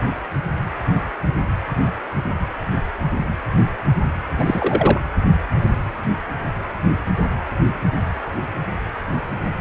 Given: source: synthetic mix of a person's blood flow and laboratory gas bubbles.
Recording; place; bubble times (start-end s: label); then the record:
Doppler ultrasound of blood flow; precordium
4.38-5.01 s: bubbles
From the record:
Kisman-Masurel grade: 223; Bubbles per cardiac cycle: several, 3 to 8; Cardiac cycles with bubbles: 10 to 50%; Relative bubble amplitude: loud (0.450 to 0.775); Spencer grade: 2 (many but less than half of the cardiac periods contain bubble signals, singularly or in groups); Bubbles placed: anywhere in the cardiac cycle